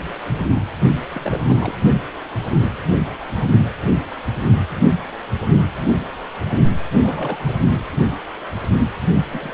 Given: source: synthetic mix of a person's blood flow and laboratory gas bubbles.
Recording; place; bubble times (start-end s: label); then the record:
Doppler ultrasound of blood flow; precordium
1.11-1.74 s: bubbles
6.99-7.38 s: bubbles
7.45-7.56 s: bubbles
7.61-7.83 s: bubbles
9.29-9.54 s: bubbles
From the record:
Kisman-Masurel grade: 221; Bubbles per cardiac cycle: several, 3 to 8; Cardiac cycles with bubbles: 10 to 50%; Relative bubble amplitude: barely perceptible (0.100 to 0.250); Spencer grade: 2 (many but less than half of the cardiac periods contain bubble signals, singularly or in groups); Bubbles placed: only in the low amplitude regions of the cardiac cycle